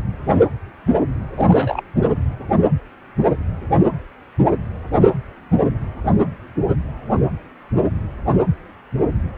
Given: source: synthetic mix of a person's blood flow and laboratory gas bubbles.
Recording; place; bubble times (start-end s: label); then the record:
Doppler ultrasound of blood flow; precordium
1.35-1.83 s: bubbles
From the record:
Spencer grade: 1 (occasional bubble signal discernible with the cardiac motion signal, with majority of cardiac periods free of bubbles); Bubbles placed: anywhere in the cardiac cycle